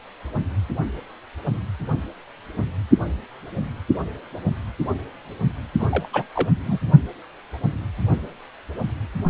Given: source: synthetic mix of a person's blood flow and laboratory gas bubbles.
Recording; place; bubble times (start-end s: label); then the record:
Doppler ultrasound of blood flow; precordium
5.79-5.88 s: bubbles
5.91-6.08 s: bubbles
6.13-6.24 s: bubbles
6.35-6.50 s: bubbles
6.65-6.78 s: bubbles
From the record:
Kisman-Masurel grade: 212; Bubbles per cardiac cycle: several, 3 to 8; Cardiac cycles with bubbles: 1 to 10%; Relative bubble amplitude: moderate (0.250 to 0.450); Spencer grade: 1 (occasional bubble signal discernible with the cardiac motion signal, with majority of cardiac periods free of bubbles); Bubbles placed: only in the low amplitude regions of the cardiac cycle